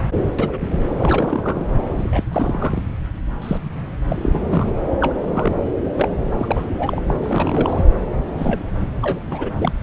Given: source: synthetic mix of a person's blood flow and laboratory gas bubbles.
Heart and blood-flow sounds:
Doppler ultrasound of blood flow; subclavian vein
0.00-0.02 s: bubbles
0.39-0.93 s: bubbles
0.98-1.65 s: bubbles
1.98-2.23 s: bubbles
2.31-2.83 s: bubbles
3.42-3.60 s: bubbles
4.07-4.73 s: bubbles
5.01-5.15 s: bubbles
5.29-5.52 s: bubbles
5.65-5.70 s: bubbles
5.95-6.10 s: bubbles
6.38-7.02 s: bubbles
7.07-7.14 s: bubbles
7.23-7.85 s: bubbles
8.37-8.61 s: bubbles
9.02-9.20 s: bubbles
9.30-9.50 s: bubbles
9.58-9.73 s: bubbles
From the record:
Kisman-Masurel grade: 242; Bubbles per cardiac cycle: several, 3 to 8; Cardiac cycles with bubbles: 100%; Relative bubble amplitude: moderate (0.250 to 0.450); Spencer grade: 3 (all of the cardiac periods contain showers or single bubble signals, but not dominating or overriding the cardiac motion signals); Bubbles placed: anywhere in the cardiac cycle

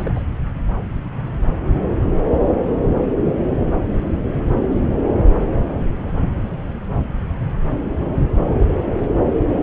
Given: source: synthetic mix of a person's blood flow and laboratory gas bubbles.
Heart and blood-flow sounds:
Doppler ultrasound of blood flow; subclavian vein
0.00-0.23 s: bubbles
From the record:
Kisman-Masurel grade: 221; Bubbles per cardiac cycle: several, 3 to 8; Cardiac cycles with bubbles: 10 to 50%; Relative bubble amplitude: barely perceptible (0.100 to 0.250); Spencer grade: 2 (many but less than half of the cardiac periods contain bubble signals, singularly or in groups); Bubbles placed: anywhere in the cardiac cycle

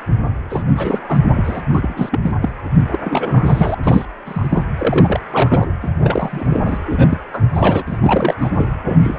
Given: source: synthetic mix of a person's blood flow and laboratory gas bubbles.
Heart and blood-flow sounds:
Doppler ultrasound of blood flow; precordium
0.00-0.03 s: bubbles
0.50-0.64 s: bubbles
0.69-1.02 s: bubbles
1.09-1.19 s: bubbles
1.34-1.61 s: bubbles
1.74-2.19 s: bubbles
2.22-2.31 s: bubbles
2.42-2.49 s: bubbles
2.88-3.75 s: bubbles
3.83-4.05 s: bubbles
4.25-4.63 s: bubbles
4.77-5.21 s: bubbles
5.29-5.67 s: bubbles
5.82-5.91 s: bubbles
6.00-6.46 s: bubbles
6.50-6.79 s: bubbles
6.86-7.18 s: bubbles
7.33-7.42 s: bubbles
7.52-7.84 s: bubbles
7.88-7.99 s: bubbles
8.02-8.35 s: bubbles
8.41-8.50 s: bubbles
8.57-8.68 s: bubbles
8.84-9.19 s: bubbles
From the record:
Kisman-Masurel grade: 342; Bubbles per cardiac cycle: rolling drumbeat, 9 or more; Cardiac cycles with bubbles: 100%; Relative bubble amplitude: moderate (0.250 to 0.450); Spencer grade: 3 (all of the cardiac periods contain showers or single bubble signals, but not dominating or overriding the cardiac motion signals); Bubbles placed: anywhere in the cardiac cycle

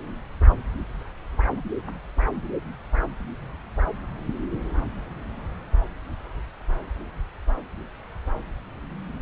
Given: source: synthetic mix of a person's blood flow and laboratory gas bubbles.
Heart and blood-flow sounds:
Doppler ultrasound of blood flow; subclavian vein
no bubbles
From the record:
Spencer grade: 0 (complete lack of bubble signals)

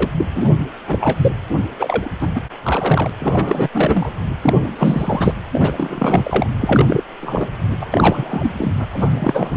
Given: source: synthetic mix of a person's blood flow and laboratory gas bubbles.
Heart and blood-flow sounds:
Doppler ultrasound of blood flow; precordium
0.00-0.09 s: bubbles
0.18-0.26 s: bubbles
0.35-0.45 s: bubbles
0.57-0.66 s: bubbles
0.88-1.31 s: bubbles
1.79-2.09 s: bubbles
2.21-2.29 s: bubbles
2.35-2.41 s: bubbles
2.63-3.10 s: bubbles
3.20-3.69 s: bubbles
3.74-4.12 s: bubbles
4.42-4.54 s: bubbles
4.75-5.33 s: bubbles
5.53-6.46 s: bubbles
6.61-7.04 s: bubbles
7.21-7.51 s: bubbles
7.81-7.86 s: bubbles
7.91-8.52 s: bubbles
8.57-8.72 s: bubbles
8.78-8.87 s: bubbles
8.91-9.57 s: bubbles
From the record:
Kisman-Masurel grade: 343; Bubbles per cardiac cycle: rolling drumbeat, 9 or more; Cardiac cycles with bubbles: 100%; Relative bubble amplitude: loud (0.450 to 0.775); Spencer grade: 3 (all of the cardiac periods contain showers or single bubble signals, but not dominating or overriding the cardiac motion signals); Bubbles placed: anywhere in the cardiac cycle

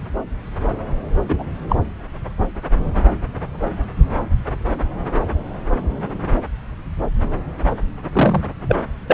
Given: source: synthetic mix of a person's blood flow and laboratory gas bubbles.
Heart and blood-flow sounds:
Doppler ultrasound of blood flow; subclavian vein
1.29-1.43 s: bubbles
1.69-1.76 s: bubbles
8.12-8.44 s: bubbles
8.68-8.76 s: bubbles
9.10-9.14 s: bubbles
From the record:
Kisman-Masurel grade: 123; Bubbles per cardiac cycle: 1 to 2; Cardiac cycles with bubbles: 10 to 50%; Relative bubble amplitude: loud (0.450 to 0.775); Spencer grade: 2 (many but less than half of the cardiac periods contain bubble signals, singularly or in groups); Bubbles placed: anywhere in the cardiac cycle

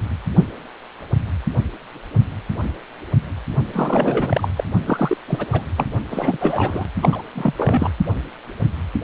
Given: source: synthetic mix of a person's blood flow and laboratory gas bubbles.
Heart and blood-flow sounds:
Doppler ultrasound of blood flow; precordium
3.73-4.48 s: bubbles
4.56-4.64 s: bubbles
4.85-5.17 s: bubbles
5.28-5.46 s: bubbles
5.52-5.64 s: bubbles
5.76-5.86 s: bubbles
6.10-6.37 s: bubbles
6.40-6.88 s: bubbles
7.01-7.09 s: bubbles
7.12-7.22 s: bubbles
7.34-7.53 s: bubbles
7.57-7.92 s: bubbles
From the record:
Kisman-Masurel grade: 332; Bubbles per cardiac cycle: rolling drumbeat, 9 or more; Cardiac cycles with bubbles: 50 to 99%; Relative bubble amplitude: moderate (0.250 to 0.450); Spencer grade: 3 (all of the cardiac periods contain showers or single bubble signals, but not dominating or overriding the cardiac motion signals); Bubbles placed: only in the low amplitude regions of the cardiac cycle

